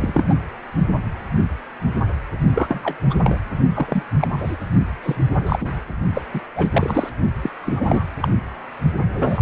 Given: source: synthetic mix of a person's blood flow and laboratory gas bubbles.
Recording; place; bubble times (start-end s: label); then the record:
Doppler ultrasound of blood flow; precordium
0.00-0.25 s: bubbles
0.30-0.35 s: bubbles
2.54-2.81 s: bubbles
2.83-2.96 s: bubbles
3.10-3.15 s: bubbles
3.24-3.39 s: bubbles
3.75-4.04 s: bubbles
4.19-4.27 s: bubbles
4.32-4.55 s: bubbles
5.03-5.15 s: bubbles
5.46-5.69 s: bubbles
6.14-6.21 s: bubbles
6.34-6.40 s: bubbles
6.55-6.68 s: bubbles
6.72-7.10 s: bubbles
7.42-7.50 s: bubbles
7.65-8.04 s: bubbles
8.21-8.28 s: bubbles
9.13-9.42 s: bubbles
From the record:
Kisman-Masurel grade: 232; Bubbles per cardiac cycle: several, 3 to 8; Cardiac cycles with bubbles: 50 to 99%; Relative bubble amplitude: moderate (0.250 to 0.450); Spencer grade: 3 (all of the cardiac periods contain showers or single bubble signals, but not dominating or overriding the cardiac motion signals); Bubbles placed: only in the low amplitude regions of the cardiac cycle